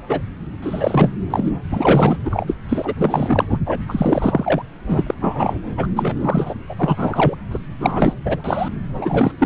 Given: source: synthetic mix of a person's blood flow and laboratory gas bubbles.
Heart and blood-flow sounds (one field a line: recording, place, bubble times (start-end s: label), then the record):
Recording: Doppler ultrasound of blood flow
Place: subclavian vein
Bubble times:
0.09-0.21 s: bubbles
0.62-1.10 s: bubbles
1.30-1.52 s: bubbles
1.71-2.17 s: bubbles
2.25-2.54 s: bubbles
2.69-3.58 s: bubbles
3.66-3.79 s: bubbles
3.88-4.62 s: bubbles
4.88-5.14 s: bubbles
5.21-5.56 s: bubbles
5.77-5.87 s: bubbles
5.96-6.16 s: bubbles
6.20-6.54 s: bubbles
6.69-7.36 s: bubbles
7.51-7.58 s: bubbles
7.79-8.13 s: bubbles
8.25-8.69 s: bubbles
8.93-9.31 s: bubbles
9.38-9.46 s: bubbles
From the record:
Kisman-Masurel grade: 333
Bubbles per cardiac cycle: rolling drumbeat, 9 or more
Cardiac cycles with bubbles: 50 to 99%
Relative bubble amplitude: loud (0.450 to 0.775)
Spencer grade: 3 (all of the cardiac periods contain showers or single bubble signals, but not dominating or overriding the cardiac motion signals)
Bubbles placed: anywhere in the cardiac cycle